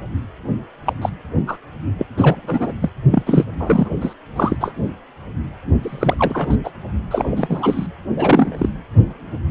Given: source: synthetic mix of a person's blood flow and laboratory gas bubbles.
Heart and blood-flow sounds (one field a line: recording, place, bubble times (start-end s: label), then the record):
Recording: Doppler ultrasound of blood flow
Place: precordium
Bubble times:
0.86-0.92 s: bubbles
1.02-1.09 s: bubbles
1.47-1.57 s: bubbles
1.98-2.06 s: bubbles
2.17-2.72 s: bubbles
2.81-2.90 s: bubbles
3.10-3.23 s: bubbles
3.26-3.46 s: bubbles
3.60-3.89 s: bubbles
4.01-4.13 s: bubbles
4.36-4.57 s: bubbles
4.60-4.74 s: bubbles
5.83-6.57 s: bubbles
6.63-6.71 s: bubbles
7.11-7.86 s: bubbles
8.16-8.69 s: bubbles
From the record:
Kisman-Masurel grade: 233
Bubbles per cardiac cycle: several, 3 to 8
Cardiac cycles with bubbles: 50 to 99%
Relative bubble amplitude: loud (0.450 to 0.775)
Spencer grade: 3 (all of the cardiac periods contain showers or single bubble signals, but not dominating or overriding the cardiac motion signals)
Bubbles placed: only in the low amplitude regions of the cardiac cycle